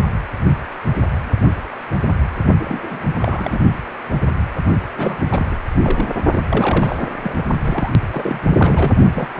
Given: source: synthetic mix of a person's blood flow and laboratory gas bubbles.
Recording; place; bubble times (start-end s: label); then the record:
Doppler ultrasound of blood flow; precordium
2.60-3.10 s: bubbles
3.19-3.59 s: bubbles
4.97-5.17 s: bubbles
5.20-5.46 s: bubbles
5.51-5.55 s: bubbles
5.82-6.11 s: bubbles
6.32-6.42 s: bubbles
6.46-6.96 s: bubbles
6.99-7.09 s: bubbles
7.23-7.43 s: bubbles
7.64-7.92 s: bubbles
8.12-8.95 s: bubbles
9.15-9.29 s: bubbles
9.33-9.40 s: bubbles
From the record:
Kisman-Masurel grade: 332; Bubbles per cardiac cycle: rolling drumbeat, 9 or more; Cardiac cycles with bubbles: 50 to 99%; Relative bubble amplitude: moderate (0.250 to 0.450); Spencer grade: 3 (all of the cardiac periods contain showers or single bubble signals, but not dominating or overriding the cardiac motion signals); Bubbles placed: only in the low amplitude regions of the cardiac cycle